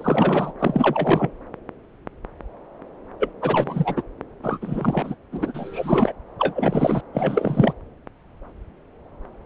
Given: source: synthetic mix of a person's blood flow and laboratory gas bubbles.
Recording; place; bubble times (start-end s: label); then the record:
Doppler ultrasound of blood flow; subclavian vein
0.00-0.53 s: bubbles
0.59-1.30 s: bubbles
3.19-3.33 s: bubbles
3.41-4.03 s: bubbles
4.42-5.16 s: bubbles
5.32-6.12 s: bubbles
6.38-7.01 s: bubbles
7.13-7.74 s: bubbles
From the record:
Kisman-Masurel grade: 333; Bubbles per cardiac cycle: rolling drumbeat, 9 or more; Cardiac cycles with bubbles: 50 to 99%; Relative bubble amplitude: loud (0.450 to 0.775); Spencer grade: 3 (all of the cardiac periods contain showers or single bubble signals, but not dominating or overriding the cardiac motion signals); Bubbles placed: anywhere in the cardiac cycle